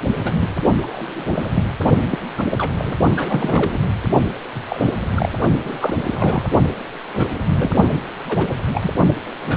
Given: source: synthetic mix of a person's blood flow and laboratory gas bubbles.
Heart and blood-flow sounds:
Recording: Doppler ultrasound of blood flow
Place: precordium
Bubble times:
0.17-0.33 s: bubbles
0.40-0.49 s: bubbles
0.82-1.64 s: bubbles
2.11-2.18 s: bubbles
2.38-2.46 s: bubbles
2.50-2.71 s: bubbles
2.77-2.96 s: bubbles
3.16-3.79 s: bubbles
4.54-4.90 s: bubbles
5.16-5.30 s: bubbles
5.65-5.77 s: bubbles
5.80-5.94 s: bubbles
6.07-6.46 s: bubbles
7.13-7.30 s: bubbles
7.47-7.72 s: bubbles
8.28-8.47 s: bubbles
8.73-8.90 s: bubbles
9.41-9.57 s: bubbles
From the record:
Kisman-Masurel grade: 242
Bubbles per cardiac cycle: several, 3 to 8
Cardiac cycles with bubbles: 100%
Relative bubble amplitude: moderate (0.250 to 0.450)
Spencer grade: 3 (all of the cardiac periods contain showers or single bubble signals, but not dominating or overriding the cardiac motion signals)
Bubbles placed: only in the low amplitude regions of the cardiac cycle

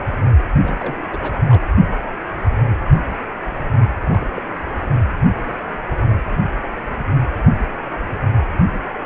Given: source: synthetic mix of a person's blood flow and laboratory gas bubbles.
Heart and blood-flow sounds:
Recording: Doppler ultrasound of blood flow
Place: precordium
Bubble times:
0.61-0.98 s: bubbles
1.11-1.32 s: bubbles
1.48-1.61 s: bubbles
4.02-4.29 s: bubbles
4.34-4.42 s: bubbles
From the record:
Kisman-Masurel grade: 221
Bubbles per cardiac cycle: several, 3 to 8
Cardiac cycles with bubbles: 10 to 50%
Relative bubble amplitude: barely perceptible (0.100 to 0.250)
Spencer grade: 2 (many but less than half of the cardiac periods contain bubble signals, singularly or in groups)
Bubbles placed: anywhere in the cardiac cycle

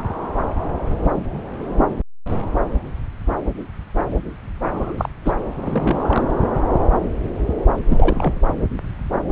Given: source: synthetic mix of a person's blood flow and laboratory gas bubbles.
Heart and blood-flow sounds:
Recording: Doppler ultrasound of blood flow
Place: subclavian vein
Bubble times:
4.74-5.09 s: bubbles
5.24-5.33 s: bubbles
5.61-6.26 s: bubbles
7.88-8.41 s: bubbles
From the record:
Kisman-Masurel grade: 222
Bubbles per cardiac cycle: several, 3 to 8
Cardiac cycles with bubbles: 10 to 50%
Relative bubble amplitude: moderate (0.250 to 0.450)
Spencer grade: 2 (many but less than half of the cardiac periods contain bubble signals, singularly or in groups)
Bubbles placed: anywhere in the cardiac cycle

